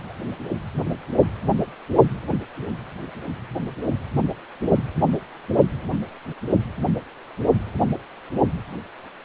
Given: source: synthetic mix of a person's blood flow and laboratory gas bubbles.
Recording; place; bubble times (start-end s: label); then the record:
Doppler ultrasound of blood flow; precordium
0.09-0.14 s: bubbles
From the record:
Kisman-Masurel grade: 211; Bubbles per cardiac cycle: several, 3 to 8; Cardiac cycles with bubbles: 1 to 10%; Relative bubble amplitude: barely perceptible (0.100 to 0.250); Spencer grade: 1 (occasional bubble signal discernible with the cardiac motion signal, with majority of cardiac periods free of bubbles); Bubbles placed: only in the low amplitude regions of the cardiac cycle